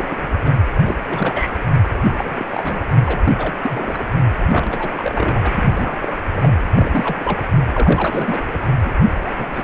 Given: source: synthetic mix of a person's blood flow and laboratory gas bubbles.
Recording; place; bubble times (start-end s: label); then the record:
Doppler ultrasound of blood flow; precordium
0.00-0.27 s: bubbles
0.43-0.54 s: bubbles
0.85-0.95 s: bubbles
1.09-1.56 s: bubbles
1.90-2.46 s: bubbles
2.50-2.81 s: bubbles
2.92-2.98 s: bubbles
3.05-3.21 s: bubbles
3.23-3.56 s: bubbles
3.61-4.04 s: bubbles
4.47-5.52 s: bubbles
5.57-6.12 s: bubbles
6.31-6.56 s: bubbles
6.77-7.40 s: bubbles
7.72-8.41 s: bubbles
8.52-8.67 s: bubbles
8.85-8.89 s: bubbles
9.04-9.48 s: bubbles
9.54-9.64 s: bubbles
From the record:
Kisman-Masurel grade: 342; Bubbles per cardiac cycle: rolling drumbeat, 9 or more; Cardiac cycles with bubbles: 100%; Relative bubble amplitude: moderate (0.250 to 0.450); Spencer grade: 3 (all of the cardiac periods contain showers or single bubble signals, but not dominating or overriding the cardiac motion signals); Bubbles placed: anywhere in the cardiac cycle